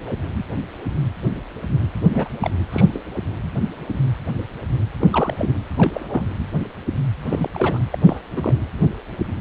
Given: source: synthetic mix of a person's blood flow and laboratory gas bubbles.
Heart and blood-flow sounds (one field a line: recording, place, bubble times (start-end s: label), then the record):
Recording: Doppler ultrasound of blood flow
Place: precordium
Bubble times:
2.10-2.29 s: bubbles
2.41-2.50 s: bubbles
2.72-2.85 s: bubbles
2.88-3.02 s: bubbles
4.99-5.08 s: bubbles
5.11-5.53 s: bubbles
5.77-6.26 s: bubbles
7.29-7.50 s: bubbles
7.54-7.84 s: bubbles
7.91-7.99 s: bubbles
8.04-8.20 s: bubbles
8.36-8.54 s: bubbles
From the record:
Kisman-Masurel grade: 232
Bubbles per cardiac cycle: several, 3 to 8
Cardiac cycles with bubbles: 50 to 99%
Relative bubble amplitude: moderate (0.250 to 0.450)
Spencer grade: 3 (all of the cardiac periods contain showers or single bubble signals, but not dominating or overriding the cardiac motion signals)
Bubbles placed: anywhere in the cardiac cycle